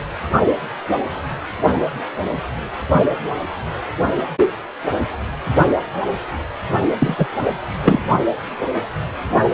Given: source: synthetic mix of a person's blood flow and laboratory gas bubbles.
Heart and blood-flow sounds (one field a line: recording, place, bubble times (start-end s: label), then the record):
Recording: Doppler ultrasound of blood flow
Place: precordium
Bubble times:
7.00-7.28 s: bubbles
7.43-7.53 s: bubbles
7.65-8.02 s: bubbles
From the record:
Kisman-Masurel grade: 213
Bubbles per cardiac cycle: several, 3 to 8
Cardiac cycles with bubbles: 1 to 10%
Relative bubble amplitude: loud (0.450 to 0.775)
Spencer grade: 1 (occasional bubble signal discernible with the cardiac motion signal, with majority of cardiac periods free of bubbles)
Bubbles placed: only in the low amplitude regions of the cardiac cycle